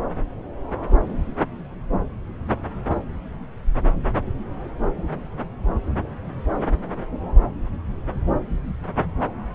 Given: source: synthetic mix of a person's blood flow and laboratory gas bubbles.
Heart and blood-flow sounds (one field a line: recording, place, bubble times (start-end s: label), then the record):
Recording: Doppler ultrasound of blood flow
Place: subclavian vein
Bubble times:
no bubbles
From the record:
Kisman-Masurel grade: 000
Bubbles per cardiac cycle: 0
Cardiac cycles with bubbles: 0%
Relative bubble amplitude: no bubbles discernible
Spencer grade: 0 (complete lack of bubble signals)